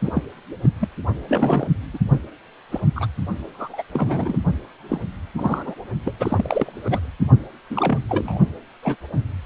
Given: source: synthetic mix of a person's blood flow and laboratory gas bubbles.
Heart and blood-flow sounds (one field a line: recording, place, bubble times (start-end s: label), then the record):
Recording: Doppler ultrasound of blood flow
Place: precordium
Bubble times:
0.01-0.11 s: bubbles
0.14-0.23 s: bubbles
0.61-0.70 s: bubbles
0.80-0.89 s: bubbles
1.28-1.66 s: bubbles
1.93-1.98 s: bubbles
2.72-2.81 s: bubbles
2.96-3.07 s: bubbles
3.54-3.83 s: bubbles
3.92-4.38 s: bubbles
4.89-5.00 s: bubbles
5.36-5.75 s: bubbles
6.05-6.13 s: bubbles
6.18-7.06 s: bubbles
7.70-7.99 s: bubbles
8.09-8.39 s: bubbles
8.83-8.96 s: bubbles
9.15-9.24 s: bubbles
From the record:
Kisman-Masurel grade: 232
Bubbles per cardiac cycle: several, 3 to 8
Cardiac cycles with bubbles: 50 to 99%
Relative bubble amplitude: moderate (0.250 to 0.450)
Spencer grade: 3 (all of the cardiac periods contain showers or single bubble signals, but not dominating or overriding the cardiac motion signals)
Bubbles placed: only in the low amplitude regions of the cardiac cycle